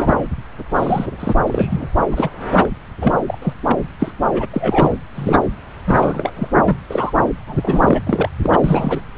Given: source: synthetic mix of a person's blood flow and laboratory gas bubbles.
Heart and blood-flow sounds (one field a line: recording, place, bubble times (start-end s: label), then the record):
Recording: Doppler ultrasound of blood flow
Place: subclavian vein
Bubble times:
0.00-0.22 s: bubbles
0.74-1.08 s: bubbles
1.20-1.33 s: bubbles
1.46-1.88 s: bubbles
2.02-2.08 s: bubbles
2.11-2.30 s: bubbles
2.52-2.69 s: bubbles
3.02-3.12 s: bubbles
3.27-3.38 s: bubbles
3.42-3.53 s: bubbles
3.68-3.76 s: bubbles
3.99-4.13 s: bubbles
4.32-4.46 s: bubbles
4.53-4.98 s: bubbles
5.15-5.38 s: bubbles
5.86-6.48 s: bubbles
6.63-6.79 s: bubbles
6.89-7.12 s: bubbles
7.47-7.99 s: bubbles
8.04-8.29 s: bubbles
8.43-8.59 s: bubbles
8.63-9.00 s: bubbles
From the record:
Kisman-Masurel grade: 242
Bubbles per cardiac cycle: several, 3 to 8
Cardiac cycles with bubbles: 100%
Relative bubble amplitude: moderate (0.250 to 0.450)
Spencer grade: 3 (all of the cardiac periods contain showers or single bubble signals, but not dominating or overriding the cardiac motion signals)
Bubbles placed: anywhere in the cardiac cycle